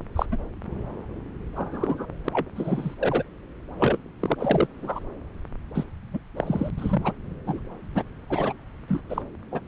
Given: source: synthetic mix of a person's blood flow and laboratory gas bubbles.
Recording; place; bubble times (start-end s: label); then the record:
Doppler ultrasound of blood flow; subclavian vein
0.15-0.26 s: bubbles
0.32-0.37 s: bubbles
1.56-2.06 s: bubbles
2.25-2.29 s: bubbles
2.33-2.49 s: bubbles
2.56-2.95 s: bubbles
3.00-3.23 s: bubbles
3.77-3.98 s: bubbles
4.21-4.36 s: bubbles
4.38-4.67 s: bubbles
4.82-5.00 s: bubbles
5.75-5.84 s: bubbles
6.13-6.19 s: bubbles
6.37-6.71 s: bubbles
6.78-7.12 s: bubbles
7.46-7.61 s: bubbles
7.95-8.03 s: bubbles
8.30-8.53 s: bubbles
8.88-9.00 s: bubbles
9.09-9.22 s: bubbles
9.51-9.61 s: bubbles
From the record:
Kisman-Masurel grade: 242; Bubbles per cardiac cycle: several, 3 to 8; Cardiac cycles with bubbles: 100%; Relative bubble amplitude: moderate (0.250 to 0.450); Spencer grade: 3 (all of the cardiac periods contain showers or single bubble signals, but not dominating or overriding the cardiac motion signals); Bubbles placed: anywhere in the cardiac cycle